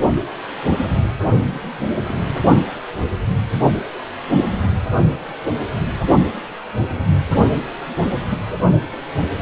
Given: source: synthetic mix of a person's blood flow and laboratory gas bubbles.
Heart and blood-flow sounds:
Doppler ultrasound of blood flow; precordium
2.08-2.15 s: bubbles
From the record:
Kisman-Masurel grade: 112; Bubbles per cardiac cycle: 1 to 2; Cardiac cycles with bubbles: 1 to 10%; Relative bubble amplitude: moderate (0.250 to 0.450); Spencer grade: 1 (occasional bubble signal discernible with the cardiac motion signal, with majority of cardiac periods free of bubbles); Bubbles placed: only in the low amplitude regions of the cardiac cycle

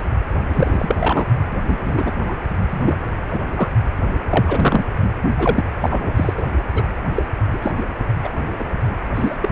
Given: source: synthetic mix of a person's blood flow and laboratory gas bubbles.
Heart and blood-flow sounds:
Doppler ultrasound of blood flow; precordium
0.47-1.25 s: bubbles
1.64-2.11 s: bubbles
2.28-2.35 s: bubbles
2.69-2.98 s: bubbles
3.31-3.41 s: bubbles
3.56-3.69 s: bubbles
4.29-4.84 s: bubbles
5.38-5.64 s: bubbles
5.80-6.12 s: bubbles
6.16-6.33 s: bubbles
6.37-6.42 s: bubbles
6.75-6.83 s: bubbles
7.15-7.23 s: bubbles
7.53-7.58 s: bubbles
7.62-7.71 s: bubbles
7.77-7.83 s: bubbles
8.23-8.29 s: bubbles
8.59-8.64 s: bubbles
9.15-9.36 s: bubbles
9.40-9.49 s: bubbles
From the record:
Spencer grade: 3 (all of the cardiac periods contain showers or single bubble signals, but not dominating or overriding the cardiac motion signals); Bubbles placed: only in the low amplitude regions of the cardiac cycle

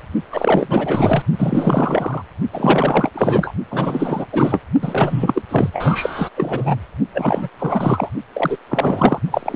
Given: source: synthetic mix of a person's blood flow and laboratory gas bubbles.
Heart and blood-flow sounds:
Doppler ultrasound of blood flow; precordium
0.30-1.23 s: bubbles
1.38-2.23 s: bubbles
2.52-3.10 s: bubbles
3.14-3.52 s: bubbles
3.70-4.27 s: bubbles
4.32-4.61 s: bubbles
4.82-5.42 s: bubbles
5.49-5.70 s: bubbles
5.73-6.29 s: bubbles
6.35-6.77 s: bubbles
7.13-7.49 s: bubbles
7.58-8.09 s: bubbles
8.33-8.58 s: bubbles
8.69-9.19 s: bubbles
9.31-9.56 s: bubbles
From the record:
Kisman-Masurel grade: 444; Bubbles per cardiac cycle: continuous sound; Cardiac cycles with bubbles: 100%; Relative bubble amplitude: maximal (0.775 to 0.999); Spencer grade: 4 (maximum detectable bubble signal sounding continuously throughout systole and diastole of every cardiac period, and overriding the amplitude of the normal cardiac signals); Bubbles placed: only in the low amplitude regions of the cardiac cycle

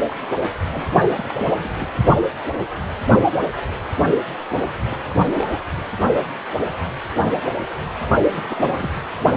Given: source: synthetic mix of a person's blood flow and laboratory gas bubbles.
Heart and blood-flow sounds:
Doppler ultrasound of blood flow; precordium
0.08-0.16 s: bubbles
0.72-0.83 s: bubbles
1.11-1.47 s: bubbles
1.55-1.89 s: bubbles
4.85-4.96 s: bubbles
5.09-5.62 s: bubbles
5.78-5.83 s: bubbles
8.30-8.89 s: bubbles
From the record:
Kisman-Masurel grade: 221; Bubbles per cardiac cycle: several, 3 to 8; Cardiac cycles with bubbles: 10 to 50%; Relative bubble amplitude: barely perceptible (0.100 to 0.250); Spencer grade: 2 (many but less than half of the cardiac periods contain bubble signals, singularly or in groups); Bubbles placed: only in the low amplitude regions of the cardiac cycle

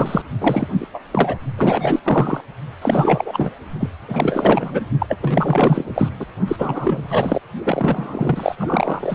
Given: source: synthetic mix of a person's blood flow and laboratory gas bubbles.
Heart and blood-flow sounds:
Doppler ultrasound of blood flow; precordium
0.00-0.22 s: bubbles
0.40-0.67 s: bubbles
0.72-0.87 s: bubbles
0.93-1.00 s: bubbles
1.11-1.38 s: bubbles
1.58-2.00 s: bubbles
2.02-2.40 s: bubbles
2.81-3.51 s: bubbles
3.80-3.90 s: bubbles
4.08-4.85 s: bubbles
4.99-5.06 s: bubbles
5.09-5.16 s: bubbles
5.21-6.09 s: bubbles
6.19-6.26 s: bubbles
6.47-7.40 s: bubbles
7.64-8.55 s: bubbles
8.59-9.15 s: bubbles
From the record:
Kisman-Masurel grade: 444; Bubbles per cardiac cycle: continuous sound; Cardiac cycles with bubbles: 100%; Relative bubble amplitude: maximal (0.775 to 0.999); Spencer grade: 4 (maximum detectable bubble signal sounding continuously throughout systole and diastole of every cardiac period, and overriding the amplitude of the normal cardiac signals); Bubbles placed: only in the low amplitude regions of the cardiac cycle

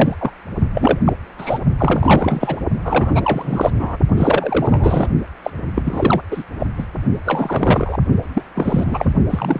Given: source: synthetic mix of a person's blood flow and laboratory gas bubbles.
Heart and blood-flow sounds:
Doppler ultrasound of blood flow; precordium
0.00-0.16 s: bubbles
0.20-0.31 s: bubbles
0.74-0.99 s: bubbles
1.05-1.13 s: bubbles
1.38-1.59 s: bubbles
1.78-2.57 s: bubbles
2.84-3.12 s: bubbles
3.14-3.70 s: bubbles
3.79-3.96 s: bubbles
4.16-5.08 s: bubbles
5.44-5.50 s: bubbles
5.75-6.25 s: bubbles
6.31-6.43 s: bubbles
6.59-6.67 s: bubbles
6.78-6.86 s: bubbles
7.25-7.97 s: bubbles
8.34-8.43 s: bubbles
8.55-9.14 s: bubbles
9.29-9.60 s: bubbles
From the record:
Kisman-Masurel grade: 343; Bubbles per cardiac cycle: rolling drumbeat, 9 or more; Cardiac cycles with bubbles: 100%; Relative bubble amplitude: loud (0.450 to 0.775); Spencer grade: 3 (all of the cardiac periods contain showers or single bubble signals, but not dominating or overriding the cardiac motion signals); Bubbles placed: only in the low amplitude regions of the cardiac cycle

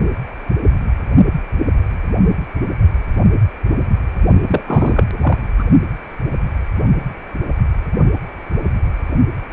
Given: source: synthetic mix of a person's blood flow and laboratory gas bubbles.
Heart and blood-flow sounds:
Doppler ultrasound of blood flow; precordium
4.46-4.61 s: bubbles
4.67-5.04 s: bubbles
5.21-5.38 s: bubbles
5.58-5.64 s: bubbles
From the record:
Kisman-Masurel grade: 213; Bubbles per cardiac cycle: several, 3 to 8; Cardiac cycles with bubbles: 1 to 10%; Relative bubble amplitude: loud (0.450 to 0.775); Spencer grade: 1 (occasional bubble signal discernible with the cardiac motion signal, with majority of cardiac periods free of bubbles); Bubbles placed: only in the low amplitude regions of the cardiac cycle

